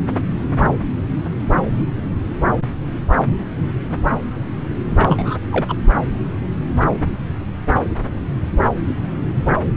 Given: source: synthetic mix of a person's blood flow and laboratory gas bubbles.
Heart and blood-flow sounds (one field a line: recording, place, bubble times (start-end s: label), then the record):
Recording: Doppler ultrasound of blood flow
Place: subclavian vein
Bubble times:
4.98-5.36 s: bubbles
5.51-5.76 s: bubbles
From the record:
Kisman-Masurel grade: 212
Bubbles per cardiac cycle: several, 3 to 8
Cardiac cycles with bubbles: 1 to 10%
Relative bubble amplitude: moderate (0.250 to 0.450)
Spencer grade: 1 (occasional bubble signal discernible with the cardiac motion signal, with majority of cardiac periods free of bubbles)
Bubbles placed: anywhere in the cardiac cycle